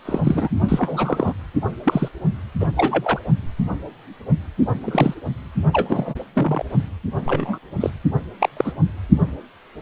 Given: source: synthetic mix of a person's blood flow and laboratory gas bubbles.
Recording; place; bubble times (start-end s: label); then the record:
Doppler ultrasound of blood flow; precordium
0.05-0.20 s: bubbles
0.24-0.49 s: bubbles
0.68-1.33 s: bubbles
1.85-2.08 s: bubbles
2.60-2.69 s: bubbles
2.76-3.20 s: bubbles
4.80-5.14 s: bubbles
5.72-6.14 s: bubbles
6.35-6.63 s: bubbles
7.25-7.58 s: bubbles
7.80-7.90 s: bubbles
8.40-8.50 s: bubbles
8.57-8.73 s: bubbles
From the record:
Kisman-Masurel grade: 232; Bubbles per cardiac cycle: several, 3 to 8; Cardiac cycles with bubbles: 50 to 99%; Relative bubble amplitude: moderate (0.250 to 0.450); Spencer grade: 3 (all of the cardiac periods contain showers or single bubble signals, but not dominating or overriding the cardiac motion signals); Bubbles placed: only in the low amplitude regions of the cardiac cycle